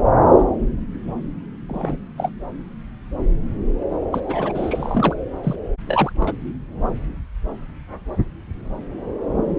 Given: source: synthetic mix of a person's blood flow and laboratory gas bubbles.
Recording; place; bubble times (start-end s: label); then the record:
Doppler ultrasound of blood flow; subclavian vein
1.68-1.97 s: bubbles
2.17-2.31 s: bubbles
4.12-4.21 s: bubbles
4.27-5.15 s: bubbles
5.43-5.56 s: bubbles
5.87-6.12 s: bubbles
6.20-6.33 s: bubbles
From the record:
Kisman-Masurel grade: 222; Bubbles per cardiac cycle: several, 3 to 8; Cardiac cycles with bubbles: 10 to 50%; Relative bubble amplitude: moderate (0.250 to 0.450); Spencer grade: 2 (many but less than half of the cardiac periods contain bubble signals, singularly or in groups); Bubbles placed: anywhere in the cardiac cycle